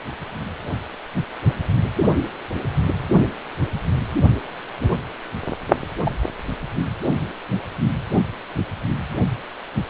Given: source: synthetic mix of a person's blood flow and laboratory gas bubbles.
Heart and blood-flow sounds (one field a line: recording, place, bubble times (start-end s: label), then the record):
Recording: Doppler ultrasound of blood flow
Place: precordium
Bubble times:
6.04-6.17 s: bubbles
From the record:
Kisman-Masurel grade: 111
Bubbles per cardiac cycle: 1 to 2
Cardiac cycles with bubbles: 1 to 10%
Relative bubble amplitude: barely perceptible (0.100 to 0.250)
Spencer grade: 1 (occasional bubble signal discernible with the cardiac motion signal, with majority of cardiac periods free of bubbles)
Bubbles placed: only in the low amplitude regions of the cardiac cycle